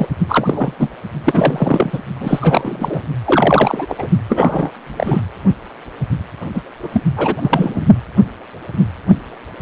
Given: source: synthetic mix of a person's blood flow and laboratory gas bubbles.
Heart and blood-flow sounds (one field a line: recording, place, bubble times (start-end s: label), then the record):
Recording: Doppler ultrasound of blood flow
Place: precordium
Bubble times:
0.00-0.06 s: bubbles
0.29-0.90 s: bubbles
1.24-1.99 s: bubbles
2.20-3.01 s: bubbles
3.24-3.95 s: bubbles
3.98-4.08 s: bubbles
4.29-4.71 s: bubbles
4.87-5.20 s: bubbles
6.54-6.62 s: bubbles
6.83-6.90 s: bubbles
6.92-7.03 s: bubbles
7.16-7.85 s: bubbles
From the record:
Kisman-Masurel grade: 333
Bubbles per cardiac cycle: rolling drumbeat, 9 or more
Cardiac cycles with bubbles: 50 to 99%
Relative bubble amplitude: loud (0.450 to 0.775)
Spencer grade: 3 (all of the cardiac periods contain showers or single bubble signals, but not dominating or overriding the cardiac motion signals)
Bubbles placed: only in the low amplitude regions of the cardiac cycle